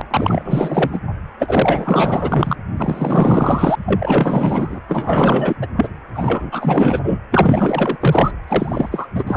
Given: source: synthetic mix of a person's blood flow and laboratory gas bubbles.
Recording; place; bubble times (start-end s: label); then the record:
Doppler ultrasound of blood flow; precordium
0.10-1.00 s: bubbles
1.39-2.56 s: bubbles
2.77-3.75 s: bubbles
3.86-4.80 s: bubbles
4.88-5.57 s: bubbles
5.62-5.67 s: bubbles
5.76-5.88 s: bubbles
6.14-7.00 s: bubbles
7.03-7.18 s: bubbles
7.32-8.31 s: bubbles
8.47-9.07 s: bubbles
9.14-9.23 s: bubbles
9.27-9.37 s: bubbles
From the record:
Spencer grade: 4 (maximum detectable bubble signal sounding continuously throughout systole and diastole of every cardiac period, and overriding the amplitude of the normal cardiac signals); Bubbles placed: anywhere in the cardiac cycle